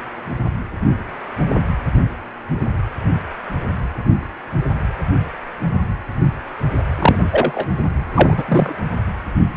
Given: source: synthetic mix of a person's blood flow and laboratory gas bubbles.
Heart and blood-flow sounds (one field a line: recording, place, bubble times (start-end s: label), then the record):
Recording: Doppler ultrasound of blood flow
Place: precordium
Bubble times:
6.98-7.16 s: bubbles
7.31-7.67 s: bubbles
8.14-8.44 s: bubbles
8.48-8.75 s: bubbles
From the record:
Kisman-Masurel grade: 223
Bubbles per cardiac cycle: several, 3 to 8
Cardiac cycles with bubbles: 10 to 50%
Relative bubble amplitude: loud (0.450 to 0.775)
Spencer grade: 2 (many but less than half of the cardiac periods contain bubble signals, singularly or in groups)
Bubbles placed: anywhere in the cardiac cycle